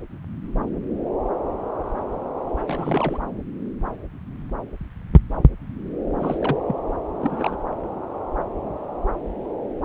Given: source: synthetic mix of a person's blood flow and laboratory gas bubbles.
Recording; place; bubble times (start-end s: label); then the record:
Doppler ultrasound of blood flow; subclavian vein
2.68-3.20 s: bubbles
6.19-6.57 s: bubbles
6.66-6.75 s: bubbles
7.20-7.57 s: bubbles
From the record:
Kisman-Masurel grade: 221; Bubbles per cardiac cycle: several, 3 to 8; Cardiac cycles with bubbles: 10 to 50%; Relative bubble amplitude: barely perceptible (0.100 to 0.250); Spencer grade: 2 (many but less than half of the cardiac periods contain bubble signals, singularly or in groups); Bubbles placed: anywhere in the cardiac cycle